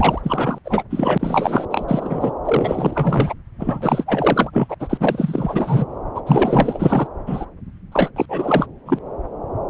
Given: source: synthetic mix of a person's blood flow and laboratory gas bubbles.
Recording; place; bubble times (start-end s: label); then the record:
Doppler ultrasound of blood flow; subclavian vein
0.00-0.58 s: bubbles
0.65-0.82 s: bubbles
0.89-1.65 s: bubbles
1.70-2.31 s: bubbles
2.45-3.33 s: bubbles
3.58-4.75 s: bubbles
4.79-4.97 s: bubbles
5.00-5.86 s: bubbles
6.15-6.21 s: bubbles
6.26-7.07 s: bubbles
7.26-7.46 s: bubbles
7.92-8.11 s: bubbles
8.16-8.26 s: bubbles
8.29-8.66 s: bubbles
8.86-8.99 s: bubbles
From the record:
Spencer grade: 4 (maximum detectable bubble signal sounding continuously throughout systole and diastole of every cardiac period, and overriding the amplitude of the normal cardiac signals); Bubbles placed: anywhere in the cardiac cycle